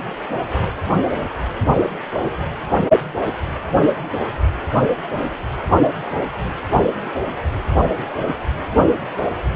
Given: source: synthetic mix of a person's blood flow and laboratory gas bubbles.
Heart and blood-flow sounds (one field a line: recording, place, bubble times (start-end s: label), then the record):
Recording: Doppler ultrasound of blood flow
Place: precordium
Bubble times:
4.74-4.86 s: bubbles
From the record:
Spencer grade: 2 (many but less than half of the cardiac periods contain bubble signals, singularly or in groups)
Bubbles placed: only in the low amplitude regions of the cardiac cycle